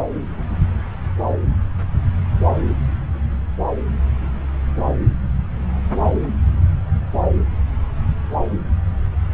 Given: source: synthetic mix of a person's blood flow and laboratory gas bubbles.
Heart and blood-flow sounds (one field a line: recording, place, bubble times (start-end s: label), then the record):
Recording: Doppler ultrasound of blood flow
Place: subclavian vein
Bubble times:
no bubbles
From the record:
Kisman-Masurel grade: 000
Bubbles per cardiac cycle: 0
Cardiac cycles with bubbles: 0%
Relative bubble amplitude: no bubbles discernible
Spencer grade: 0 (complete lack of bubble signals)